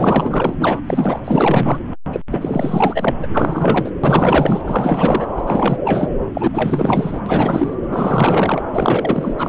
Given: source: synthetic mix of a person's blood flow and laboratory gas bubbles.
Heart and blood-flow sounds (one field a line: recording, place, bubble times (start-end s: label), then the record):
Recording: Doppler ultrasound of blood flow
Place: subclavian vein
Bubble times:
0.00-1.20 s: bubbles
1.24-1.78 s: bubbles
2.12-2.21 s: bubbles
2.31-3.11 s: bubbles
3.19-3.28 s: bubbles
3.33-3.91 s: bubbles
4.04-4.62 s: bubbles
4.64-5.27 s: bubbles
5.36-5.44 s: bubbles
5.46-5.78 s: bubbles
5.84-6.08 s: bubbles
6.34-7.20 s: bubbles
7.26-7.78 s: bubbles
7.92-8.62 s: bubbles
8.75-9.35 s: bubbles
9.38-9.49 s: bubbles
From the record:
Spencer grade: 4 (maximum detectable bubble signal sounding continuously throughout systole and diastole of every cardiac period, and overriding the amplitude of the normal cardiac signals)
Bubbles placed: anywhere in the cardiac cycle